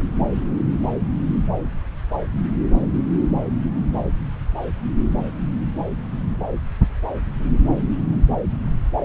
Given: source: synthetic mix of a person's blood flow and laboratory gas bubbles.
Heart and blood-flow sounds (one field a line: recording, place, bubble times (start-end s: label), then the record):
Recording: Doppler ultrasound of blood flow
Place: subclavian vein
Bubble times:
no bubbles
From the record:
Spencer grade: 0 (complete lack of bubble signals)